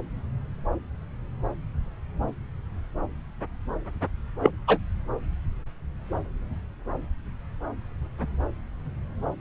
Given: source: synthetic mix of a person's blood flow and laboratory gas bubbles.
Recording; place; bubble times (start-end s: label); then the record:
Doppler ultrasound of blood flow; subclavian vein
4.41-4.50 s: bubbles
4.67-4.79 s: bubbles
From the record:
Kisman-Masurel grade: 113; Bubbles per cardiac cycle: 1 to 2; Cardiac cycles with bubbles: 1 to 10%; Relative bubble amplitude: loud (0.450 to 0.775); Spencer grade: 1 (occasional bubble signal discernible with the cardiac motion signal, with majority of cardiac periods free of bubbles); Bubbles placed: anywhere in the cardiac cycle